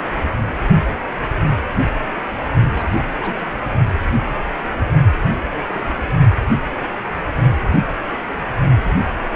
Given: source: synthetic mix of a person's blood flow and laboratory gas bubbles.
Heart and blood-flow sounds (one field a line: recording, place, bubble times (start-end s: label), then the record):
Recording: Doppler ultrasound of blood flow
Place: precordium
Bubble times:
2.75-3.05 s: bubbles
3.20-3.47 s: bubbles
3.49-3.59 s: bubbles
5.50-5.58 s: bubbles
5.67-5.94 s: bubbles
From the record:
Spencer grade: 2 (many but less than half of the cardiac periods contain bubble signals, singularly or in groups)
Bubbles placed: only in the low amplitude regions of the cardiac cycle